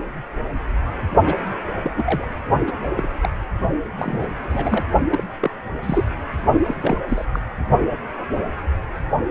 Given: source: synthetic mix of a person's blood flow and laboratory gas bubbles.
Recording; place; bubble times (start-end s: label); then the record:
Doppler ultrasound of blood flow; precordium
1.25-1.35 s: bubbles
1.83-1.91 s: bubbles
1.96-2.27 s: bubbles
2.67-2.72 s: bubbles
2.96-3.10 s: bubbles
3.20-3.28 s: bubbles
3.97-4.29 s: bubbles
4.50-4.89 s: bubbles
5.12-5.24 s: bubbles
5.41-5.50 s: bubbles
5.83-6.09 s: bubbles
6.62-6.75 s: bubbles
6.81-6.97 s: bubbles
7.08-7.25 s: bubbles
7.33-7.39 s: bubbles
From the record:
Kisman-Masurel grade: 232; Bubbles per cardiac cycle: several, 3 to 8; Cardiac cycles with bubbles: 50 to 99%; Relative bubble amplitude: moderate (0.250 to 0.450); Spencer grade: 3 (all of the cardiac periods contain showers or single bubble signals, but not dominating or overriding the cardiac motion signals); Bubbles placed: only in the low amplitude regions of the cardiac cycle